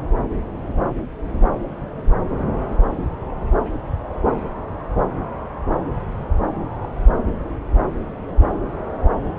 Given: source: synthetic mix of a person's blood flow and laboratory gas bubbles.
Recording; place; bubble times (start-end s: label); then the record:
Doppler ultrasound of blood flow; subclavian vein
6.83-6.88 s: bubbles
From the record:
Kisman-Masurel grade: 121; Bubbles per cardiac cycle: 1 to 2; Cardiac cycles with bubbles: 10 to 50%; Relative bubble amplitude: barely perceptible (0.100 to 0.250); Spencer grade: 2 (many but less than half of the cardiac periods contain bubble signals, singularly or in groups); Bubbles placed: anywhere in the cardiac cycle